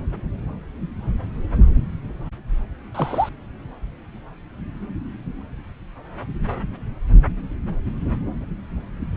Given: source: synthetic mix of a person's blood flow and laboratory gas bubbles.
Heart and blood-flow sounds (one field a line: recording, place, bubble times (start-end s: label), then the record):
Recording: Doppler ultrasound of blood flow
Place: subclavian vein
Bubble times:
2.94-3.29 s: bubbles
From the record:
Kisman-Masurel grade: 112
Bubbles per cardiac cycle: 1 to 2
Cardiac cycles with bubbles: 1 to 10%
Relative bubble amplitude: moderate (0.250 to 0.450)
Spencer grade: 1 (occasional bubble signal discernible with the cardiac motion signal, with majority of cardiac periods free of bubbles)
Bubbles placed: anywhere in the cardiac cycle